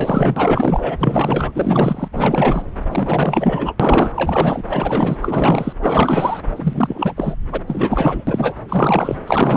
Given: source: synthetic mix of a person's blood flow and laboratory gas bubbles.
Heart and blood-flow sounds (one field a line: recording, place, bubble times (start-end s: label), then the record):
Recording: Doppler ultrasound of blood flow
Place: subclavian vein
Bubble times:
0.00-0.97 s: bubbles
1.00-1.52 s: bubbles
1.54-2.08 s: bubbles
2.12-2.62 s: bubbles
2.90-3.73 s: bubbles
3.79-4.12 s: bubbles
4.16-4.62 s: bubbles
4.69-5.17 s: bubbles
5.21-5.73 s: bubbles
5.82-6.41 s: bubbles
6.56-7.37 s: bubbles
7.52-7.62 s: bubbles
7.67-8.24 s: bubbles
8.27-8.54 s: bubbles
8.68-9.17 s: bubbles
9.27-9.57 s: bubbles
From the record:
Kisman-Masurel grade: 444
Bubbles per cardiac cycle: continuous sound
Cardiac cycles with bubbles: 100%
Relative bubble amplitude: maximal (0.775 to 0.999)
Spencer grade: 4 (maximum detectable bubble signal sounding continuously throughout systole and diastole of every cardiac period, and overriding the amplitude of the normal cardiac signals)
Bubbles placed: anywhere in the cardiac cycle